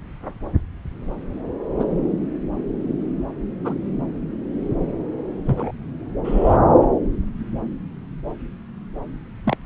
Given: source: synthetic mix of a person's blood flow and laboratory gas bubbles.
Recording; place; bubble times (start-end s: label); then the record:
Doppler ultrasound of blood flow; subclavian vein
1.80-1.84 s: bubbles
3.64-3.74 s: bubbles
5.46-5.71 s: bubbles
6.24-6.57 s: bubbles
9.45-9.57 s: bubbles
From the record:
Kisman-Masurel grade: 122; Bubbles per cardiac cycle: 1 to 2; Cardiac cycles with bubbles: 10 to 50%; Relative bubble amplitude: moderate (0.250 to 0.450); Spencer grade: 2 (many but less than half of the cardiac periods contain bubble signals, singularly or in groups); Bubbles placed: anywhere in the cardiac cycle